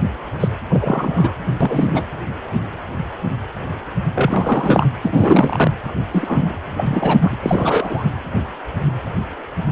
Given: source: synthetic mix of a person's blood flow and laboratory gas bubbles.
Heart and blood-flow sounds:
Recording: Doppler ultrasound of blood flow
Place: precordium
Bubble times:
0.40-0.48 s: bubbles
0.69-1.35 s: bubbles
1.60-2.05 s: bubbles
4.14-4.87 s: bubbles
5.02-5.71 s: bubbles
6.12-6.52 s: bubbles
6.77-7.37 s: bubbles
7.42-8.04 s: bubbles
From the record:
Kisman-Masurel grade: 233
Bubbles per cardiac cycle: several, 3 to 8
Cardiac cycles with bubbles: 50 to 99%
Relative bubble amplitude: loud (0.450 to 0.775)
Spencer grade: 3 (all of the cardiac periods contain showers or single bubble signals, but not dominating or overriding the cardiac motion signals)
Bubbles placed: anywhere in the cardiac cycle

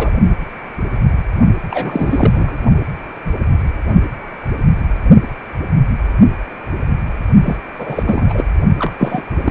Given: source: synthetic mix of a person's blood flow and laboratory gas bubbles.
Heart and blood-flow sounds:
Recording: Doppler ultrasound of blood flow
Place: precordium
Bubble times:
0.00-0.11 s: bubbles
1.71-2.58 s: bubbles
7.43-7.58 s: bubbles
7.78-8.44 s: bubbles
8.78-8.92 s: bubbles
8.99-9.22 s: bubbles
9.44-9.51 s: bubbles
From the record:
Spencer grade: 3 (all of the cardiac periods contain showers or single bubble signals, but not dominating or overriding the cardiac motion signals)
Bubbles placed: only in the low amplitude regions of the cardiac cycle

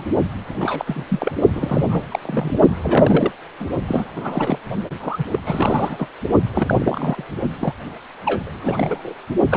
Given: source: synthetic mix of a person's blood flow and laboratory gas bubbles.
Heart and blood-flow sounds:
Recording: Doppler ultrasound of blood flow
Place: precordium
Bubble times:
0.00-0.04 s: bubbles
0.49-1.04 s: bubbles
1.08-1.32 s: bubbles
1.53-2.06 s: bubbles
2.11-2.19 s: bubbles
2.22-2.58 s: bubbles
2.78-3.32 s: bubbles
3.60-3.66 s: bubbles
3.87-4.11 s: bubbles
4.15-4.58 s: bubbles
5.00-5.25 s: bubbles
5.31-6.09 s: bubbles
6.53-7.25 s: bubbles
7.60-7.74 s: bubbles
8.25-9.13 s: bubbles
9.49-9.57 s: bubbles
From the record:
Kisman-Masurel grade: 332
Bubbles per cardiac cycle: rolling drumbeat, 9 or more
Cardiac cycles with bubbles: 50 to 99%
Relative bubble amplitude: moderate (0.250 to 0.450)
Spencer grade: 3 (all of the cardiac periods contain showers or single bubble signals, but not dominating or overriding the cardiac motion signals)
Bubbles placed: only in the low amplitude regions of the cardiac cycle

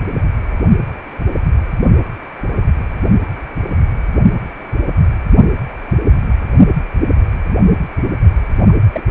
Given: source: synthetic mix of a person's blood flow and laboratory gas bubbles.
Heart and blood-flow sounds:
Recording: Doppler ultrasound of blood flow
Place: precordium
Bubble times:
8.68-8.73 s: bubbles
8.92-9.01 s: bubbles
From the record:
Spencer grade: 2 (many but less than half of the cardiac periods contain bubble signals, singularly or in groups)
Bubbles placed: only in the low amplitude regions of the cardiac cycle

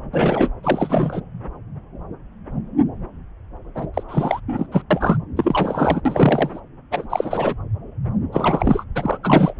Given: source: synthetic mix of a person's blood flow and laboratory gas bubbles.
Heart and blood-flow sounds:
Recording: Doppler ultrasound of blood flow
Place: subclavian vein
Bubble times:
0.13-0.49 s: bubbles
0.63-1.21 s: bubbles
3.75-3.87 s: bubbles
3.94-4.03 s: bubbles
4.08-4.40 s: bubbles
4.48-4.67 s: bubbles
4.71-4.82 s: bubbles
4.90-5.17 s: bubbles
5.36-6.01 s: bubbles
6.05-6.60 s: bubbles
6.90-7.55 s: bubbles
8.32-8.86 s: bubbles
8.95-9.18 s: bubbles
9.23-9.54 s: bubbles
From the record:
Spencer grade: 3 (all of the cardiac periods contain showers or single bubble signals, but not dominating or overriding the cardiac motion signals)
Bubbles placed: anywhere in the cardiac cycle

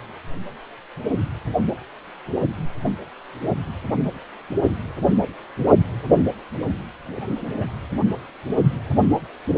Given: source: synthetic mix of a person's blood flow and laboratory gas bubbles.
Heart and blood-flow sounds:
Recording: Doppler ultrasound of blood flow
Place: precordium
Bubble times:
7.13-7.21 s: bubbles
7.56-7.66 s: bubbles
From the record:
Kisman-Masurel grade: 111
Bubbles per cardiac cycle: 1 to 2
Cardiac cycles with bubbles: 1 to 10%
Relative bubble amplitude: barely perceptible (0.100 to 0.250)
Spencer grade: 1 (occasional bubble signal discernible with the cardiac motion signal, with majority of cardiac periods free of bubbles)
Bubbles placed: only in the low amplitude regions of the cardiac cycle

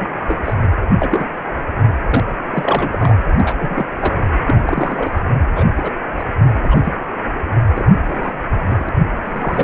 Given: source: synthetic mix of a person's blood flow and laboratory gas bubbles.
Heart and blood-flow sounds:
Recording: Doppler ultrasound of blood flow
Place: precordium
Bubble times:
0.00-0.39 s: bubbles
0.45-0.54 s: bubbles
0.99-1.26 s: bubbles
2.10-2.24 s: bubbles
2.51-3.16 s: bubbles
3.37-3.84 s: bubbles
3.98-4.16 s: bubbles
4.21-4.29 s: bubbles
4.47-5.23 s: bubbles
5.55-5.66 s: bubbles
5.75-5.92 s: bubbles
6.17-6.25 s: bubbles
6.62-6.80 s: bubbles
6.83-6.92 s: bubbles
7.75-7.84 s: bubbles
8.04-8.33 s: bubbles
8.69-8.89 s: bubbles
9.25-9.64 s: bubbles
From the record:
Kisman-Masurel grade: 242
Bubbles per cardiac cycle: several, 3 to 8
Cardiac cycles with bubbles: 100%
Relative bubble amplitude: moderate (0.250 to 0.450)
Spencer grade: 3 (all of the cardiac periods contain showers or single bubble signals, but not dominating or overriding the cardiac motion signals)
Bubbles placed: anywhere in the cardiac cycle

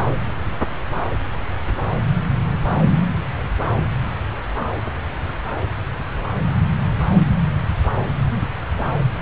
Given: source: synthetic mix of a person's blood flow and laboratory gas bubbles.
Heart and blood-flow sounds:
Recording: Doppler ultrasound of blood flow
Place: subclavian vein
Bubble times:
no bubbles
From the record:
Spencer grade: 0 (complete lack of bubble signals)

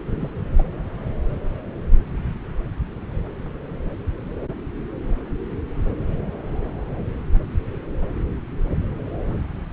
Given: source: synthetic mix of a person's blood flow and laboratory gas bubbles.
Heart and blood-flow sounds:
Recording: Doppler ultrasound of blood flow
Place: subclavian vein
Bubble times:
0.11-0.30 s: bubbles
0.55-0.68 s: bubbles
From the record:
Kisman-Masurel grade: 211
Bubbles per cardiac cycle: several, 3 to 8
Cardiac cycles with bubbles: 1 to 10%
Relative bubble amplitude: barely perceptible (0.100 to 0.250)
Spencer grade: 1 (occasional bubble signal discernible with the cardiac motion signal, with majority of cardiac periods free of bubbles)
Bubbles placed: anywhere in the cardiac cycle

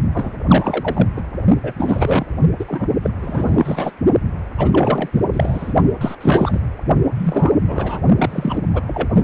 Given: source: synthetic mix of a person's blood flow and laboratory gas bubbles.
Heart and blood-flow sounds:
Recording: Doppler ultrasound of blood flow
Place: precordium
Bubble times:
0.14-0.32 s: bubbles
0.48-1.07 s: bubbles
1.15-1.21 s: bubbles
1.62-1.73 s: bubbles
1.78-2.26 s: bubbles
2.59-2.65 s: bubbles
2.68-2.87 s: bubbles
3.03-3.10 s: bubbles
3.19-3.92 s: bubbles
4.58-5.09 s: bubbles
5.12-5.23 s: bubbles
5.32-5.73 s: bubbles
6.00-6.15 s: bubbles
6.21-6.60 s: bubbles
7.14-7.52 s: bubbles
7.65-8.00 s: bubbles
8.18-8.58 s: bubbles
8.73-8.82 s: bubbles
8.87-9.08 s: bubbles
9.14-9.23 s: bubbles
From the record:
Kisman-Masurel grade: 343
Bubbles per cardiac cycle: rolling drumbeat, 9 or more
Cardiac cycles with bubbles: 100%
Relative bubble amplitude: loud (0.450 to 0.775)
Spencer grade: 3 (all of the cardiac periods contain showers or single bubble signals, but not dominating or overriding the cardiac motion signals)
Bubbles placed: only in the low amplitude regions of the cardiac cycle

